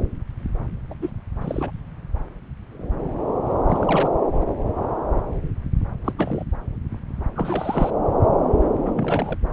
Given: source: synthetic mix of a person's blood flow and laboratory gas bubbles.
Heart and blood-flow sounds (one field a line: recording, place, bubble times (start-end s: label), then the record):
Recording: Doppler ultrasound of blood flow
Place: subclavian vein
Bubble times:
0.89-0.93 s: bubbles
1.02-1.10 s: bubbles
1.41-1.71 s: bubbles
3.68-4.09 s: bubbles
6.04-6.14 s: bubbles
6.18-6.44 s: bubbles
7.36-7.90 s: bubbles
8.85-8.92 s: bubbles
8.96-9.39 s: bubbles
From the record:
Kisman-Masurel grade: 221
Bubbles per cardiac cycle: several, 3 to 8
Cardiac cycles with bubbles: 10 to 50%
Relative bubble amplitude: barely perceptible (0.100 to 0.250)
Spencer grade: 2 (many but less than half of the cardiac periods contain bubble signals, singularly or in groups)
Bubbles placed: anywhere in the cardiac cycle